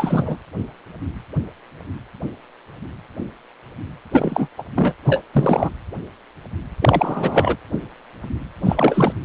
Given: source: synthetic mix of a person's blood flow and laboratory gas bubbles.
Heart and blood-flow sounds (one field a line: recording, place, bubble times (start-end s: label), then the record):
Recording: Doppler ultrasound of blood flow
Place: precordium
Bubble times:
0.00-0.37 s: bubbles
4.11-4.47 s: bubbles
4.58-4.62 s: bubbles
4.75-4.93 s: bubbles
5.05-5.21 s: bubbles
5.33-5.70 s: bubbles
6.80-7.56 s: bubbles
8.60-9.12 s: bubbles
From the record:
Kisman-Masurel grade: 332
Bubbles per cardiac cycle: rolling drumbeat, 9 or more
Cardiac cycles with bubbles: 50 to 99%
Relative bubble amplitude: moderate (0.250 to 0.450)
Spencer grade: 3 (all of the cardiac periods contain showers or single bubble signals, but not dominating or overriding the cardiac motion signals)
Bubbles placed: anywhere in the cardiac cycle